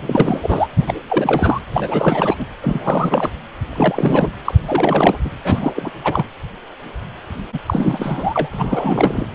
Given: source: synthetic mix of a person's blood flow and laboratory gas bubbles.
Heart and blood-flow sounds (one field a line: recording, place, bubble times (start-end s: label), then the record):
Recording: Doppler ultrasound of blood flow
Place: precordium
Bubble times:
0.00-0.68 s: bubbles
0.78-0.94 s: bubbles
1.08-1.61 s: bubbles
1.72-2.34 s: bubbles
2.38-2.46 s: bubbles
2.61-3.29 s: bubbles
3.67-4.29 s: bubbles
4.44-4.54 s: bubbles
4.67-5.17 s: bubbles
5.25-5.30 s: bubbles
5.44-5.73 s: bubbles
5.76-5.90 s: bubbles
6.04-6.25 s: bubbles
7.52-7.59 s: bubbles
7.66-9.27 s: bubbles
From the record:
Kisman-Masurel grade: 333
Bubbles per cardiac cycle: rolling drumbeat, 9 or more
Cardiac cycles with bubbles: 50 to 99%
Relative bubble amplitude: loud (0.450 to 0.775)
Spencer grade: 3 (all of the cardiac periods contain showers or single bubble signals, but not dominating or overriding the cardiac motion signals)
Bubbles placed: anywhere in the cardiac cycle